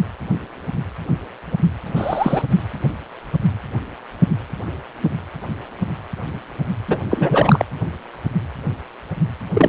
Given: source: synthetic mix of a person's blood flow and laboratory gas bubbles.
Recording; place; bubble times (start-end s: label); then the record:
Doppler ultrasound of blood flow; precordium
1.96-2.42 s: bubbles
6.88-6.98 s: bubbles
7.10-7.65 s: bubbles
9.53-9.69 s: bubbles
From the record:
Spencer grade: 2 (many but less than half of the cardiac periods contain bubble signals, singularly or in groups); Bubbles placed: anywhere in the cardiac cycle